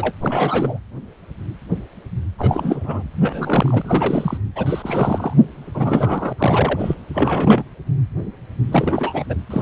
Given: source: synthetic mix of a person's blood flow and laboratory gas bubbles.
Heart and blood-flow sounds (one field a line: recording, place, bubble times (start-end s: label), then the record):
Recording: Doppler ultrasound of blood flow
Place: precordium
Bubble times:
0.00-0.14 s: bubbles
0.21-0.80 s: bubbles
2.38-3.03 s: bubbles
3.16-4.38 s: bubbles
4.55-5.33 s: bubbles
5.75-6.33 s: bubbles
6.38-6.95 s: bubbles
7.14-7.63 s: bubbles
8.71-9.24 s: bubbles
9.29-9.35 s: bubbles
9.50-9.62 s: bubbles
From the record:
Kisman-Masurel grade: 332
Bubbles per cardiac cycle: rolling drumbeat, 9 or more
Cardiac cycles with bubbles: 50 to 99%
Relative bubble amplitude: moderate (0.250 to 0.450)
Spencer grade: 3 (all of the cardiac periods contain showers or single bubble signals, but not dominating or overriding the cardiac motion signals)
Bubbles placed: anywhere in the cardiac cycle